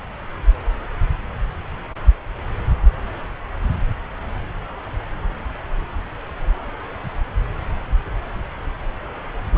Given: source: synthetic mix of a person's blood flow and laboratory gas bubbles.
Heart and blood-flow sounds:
Doppler ultrasound of blood flow; subclavian vein
9.50-9.58 s: bubbles
From the record:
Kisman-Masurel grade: 211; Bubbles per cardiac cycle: several, 3 to 8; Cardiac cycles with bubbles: 1 to 10%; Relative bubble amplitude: barely perceptible (0.100 to 0.250); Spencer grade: 1 (occasional bubble signal discernible with the cardiac motion signal, with majority of cardiac periods free of bubbles); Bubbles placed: anywhere in the cardiac cycle

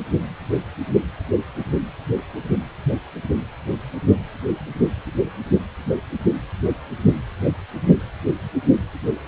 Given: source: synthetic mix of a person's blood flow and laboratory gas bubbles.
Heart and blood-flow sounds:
Doppler ultrasound of blood flow; precordium
no bubbles
From the record:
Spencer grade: 0 (complete lack of bubble signals)

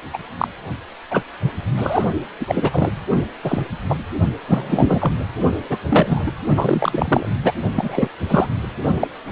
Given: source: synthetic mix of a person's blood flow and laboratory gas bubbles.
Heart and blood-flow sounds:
Doppler ultrasound of blood flow; precordium
0.13-0.18 s: bubbles
0.38-0.48 s: bubbles
1.10-1.21 s: bubbles
1.77-2.02 s: bubbles
2.40-2.91 s: bubbles
3.44-3.62 s: bubbles
3.90-3.95 s: bubbles
4.47-5.21 s: bubbles
5.69-5.78 s: bubbles
5.90-6.32 s: bubbles
6.56-7.29 s: bubbles
7.44-7.53 s: bubbles
7.76-8.08 s: bubbles
8.29-8.48 s: bubbles
9.00-9.08 s: bubbles
From the record:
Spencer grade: 3 (all of the cardiac periods contain showers or single bubble signals, but not dominating or overriding the cardiac motion signals); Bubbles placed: only in the low amplitude regions of the cardiac cycle

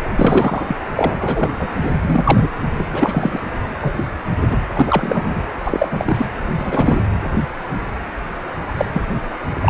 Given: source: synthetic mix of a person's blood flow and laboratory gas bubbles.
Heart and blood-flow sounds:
Doppler ultrasound of blood flow; precordium
0.16-0.77 s: bubbles
0.96-1.51 s: bubbles
1.59-1.69 s: bubbles
1.81-1.96 s: bubbles
2.02-2.48 s: bubbles
2.79-2.85 s: bubbles
2.93-3.40 s: bubbles
3.81-4.07 s: bubbles
4.40-4.58 s: bubbles
4.75-5.44 s: bubbles
5.64-6.26 s: bubbles
6.58-7.06 s: bubbles
8.77-8.86 s: bubbles
8.93-9.02 s: bubbles
9.62-9.69 s: bubbles
From the record:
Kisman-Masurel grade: 233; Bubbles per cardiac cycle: several, 3 to 8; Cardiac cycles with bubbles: 50 to 99%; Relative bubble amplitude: loud (0.450 to 0.775); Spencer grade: 3 (all of the cardiac periods contain showers or single bubble signals, but not dominating or overriding the cardiac motion signals); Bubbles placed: anywhere in the cardiac cycle

